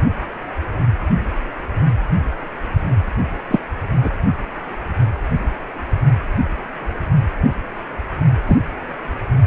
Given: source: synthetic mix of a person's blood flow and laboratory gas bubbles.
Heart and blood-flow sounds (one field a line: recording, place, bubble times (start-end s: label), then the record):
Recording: Doppler ultrasound of blood flow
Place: precordium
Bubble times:
3.50-3.59 s: bubbles
4.02-4.10 s: bubbles
8.47-8.57 s: bubbles
From the record:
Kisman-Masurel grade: 123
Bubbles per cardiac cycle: 1 to 2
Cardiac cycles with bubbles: 10 to 50%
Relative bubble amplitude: loud (0.450 to 0.775)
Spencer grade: 2 (many but less than half of the cardiac periods contain bubble signals, singularly or in groups)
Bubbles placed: anywhere in the cardiac cycle